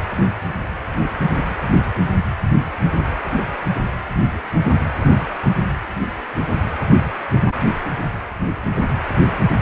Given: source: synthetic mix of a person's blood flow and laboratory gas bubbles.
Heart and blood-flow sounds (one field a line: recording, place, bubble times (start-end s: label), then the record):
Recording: Doppler ultrasound of blood flow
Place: precordium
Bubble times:
0.93-1.01 s: bubbles
From the record:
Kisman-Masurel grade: 111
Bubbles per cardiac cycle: 1 to 2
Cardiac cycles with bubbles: 1 to 10%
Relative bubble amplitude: barely perceptible (0.100 to 0.250)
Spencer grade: 1 (occasional bubble signal discernible with the cardiac motion signal, with majority of cardiac periods free of bubbles)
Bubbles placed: anywhere in the cardiac cycle